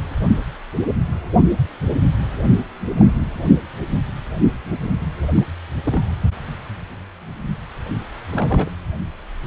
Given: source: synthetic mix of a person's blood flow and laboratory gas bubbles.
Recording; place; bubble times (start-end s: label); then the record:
Doppler ultrasound of blood flow; precordium
2.97-3.10 s: bubbles
5.36-5.44 s: bubbles
5.85-6.01 s: bubbles
8.31-8.70 s: bubbles
From the record:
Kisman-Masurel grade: 122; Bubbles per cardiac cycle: 1 to 2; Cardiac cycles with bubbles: 10 to 50%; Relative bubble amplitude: moderate (0.250 to 0.450); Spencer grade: 2 (many but less than half of the cardiac periods contain bubble signals, singularly or in groups); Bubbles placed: anywhere in the cardiac cycle